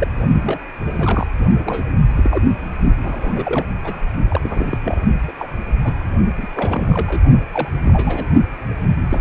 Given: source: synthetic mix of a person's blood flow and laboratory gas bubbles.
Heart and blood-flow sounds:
Doppler ultrasound of blood flow; precordium
0.00-0.08 s: bubbles
0.41-0.59 s: bubbles
0.95-1.28 s: bubbles
1.64-1.83 s: bubbles
2.17-2.45 s: bubbles
3.02-3.66 s: bubbles
3.84-3.97 s: bubbles
4.29-4.77 s: bubbles
4.84-5.00 s: bubbles
5.28-5.32 s: bubbles
5.38-5.50 s: bubbles
5.83-5.93 s: bubbles
6.38-6.47 s: bubbles
6.55-7.22 s: bubbles
7.52-7.69 s: bubbles
7.84-8.26 s: bubbles
9.10-9.21 s: bubbles
From the record:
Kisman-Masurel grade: 242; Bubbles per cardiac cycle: several, 3 to 8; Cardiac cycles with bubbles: 100%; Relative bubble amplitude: moderate (0.250 to 0.450); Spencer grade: 3 (all of the cardiac periods contain showers or single bubble signals, but not dominating or overriding the cardiac motion signals); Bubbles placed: only in the low amplitude regions of the cardiac cycle

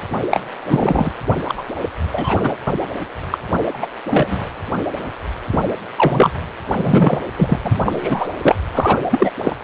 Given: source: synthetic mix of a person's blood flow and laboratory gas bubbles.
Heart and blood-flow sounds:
Doppler ultrasound of blood flow; precordium
0.30-0.42 s: bubbles
0.67-1.12 s: bubbles
1.48-1.54 s: bubbles
1.57-1.64 s: bubbles
2.12-2.56 s: bubbles
3.31-3.38 s: bubbles
3.73-3.86 s: bubbles
4.11-4.48 s: bubbles
5.52-5.59 s: bubbles
5.96-6.32 s: bubbles
6.78-7.19 s: bubbles
7.37-7.59 s: bubbles
7.64-7.71 s: bubbles
7.85-8.29 s: bubbles
8.42-8.55 s: bubbles
8.72-8.99 s: bubbles
9.10-9.32 s: bubbles
9.44-9.56 s: bubbles
From the record:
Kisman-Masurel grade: 233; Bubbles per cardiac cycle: several, 3 to 8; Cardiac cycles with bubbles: 50 to 99%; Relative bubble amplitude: loud (0.450 to 0.775); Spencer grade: 3 (all of the cardiac periods contain showers or single bubble signals, but not dominating or overriding the cardiac motion signals); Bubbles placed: anywhere in the cardiac cycle

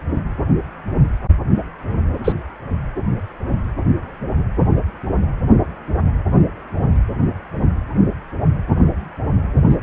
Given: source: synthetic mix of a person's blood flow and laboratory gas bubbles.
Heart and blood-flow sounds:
Doppler ultrasound of blood flow; precordium
2.24-2.33 s: bubbles
9.69-9.76 s: bubbles
From the record:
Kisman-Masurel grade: 123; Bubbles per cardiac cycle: 1 to 2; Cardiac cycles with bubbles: 10 to 50%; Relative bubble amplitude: loud (0.450 to 0.775); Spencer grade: 2 (many but less than half of the cardiac periods contain bubble signals, singularly or in groups); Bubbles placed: anywhere in the cardiac cycle

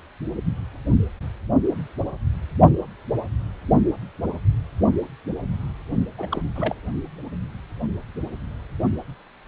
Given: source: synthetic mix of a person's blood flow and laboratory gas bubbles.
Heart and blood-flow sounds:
Doppler ultrasound of blood flow; precordium
6.18-6.26 s: bubbles
6.30-6.42 s: bubbles
6.55-6.75 s: bubbles
From the record:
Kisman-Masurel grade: 212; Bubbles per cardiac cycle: several, 3 to 8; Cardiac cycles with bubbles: 1 to 10%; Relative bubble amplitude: moderate (0.250 to 0.450); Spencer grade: 1 (occasional bubble signal discernible with the cardiac motion signal, with majority of cardiac periods free of bubbles); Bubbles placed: only in the low amplitude regions of the cardiac cycle

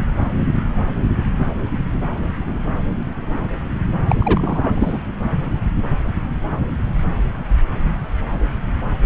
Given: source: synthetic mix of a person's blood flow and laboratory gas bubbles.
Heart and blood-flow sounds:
Doppler ultrasound of blood flow; subclavian vein
4.09-4.15 s: bubbles
4.19-4.99 s: bubbles
From the record:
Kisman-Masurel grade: 213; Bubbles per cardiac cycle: several, 3 to 8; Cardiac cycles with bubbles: 1 to 10%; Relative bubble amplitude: loud (0.450 to 0.775); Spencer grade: 1 (occasional bubble signal discernible with the cardiac motion signal, with majority of cardiac periods free of bubbles); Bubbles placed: anywhere in the cardiac cycle

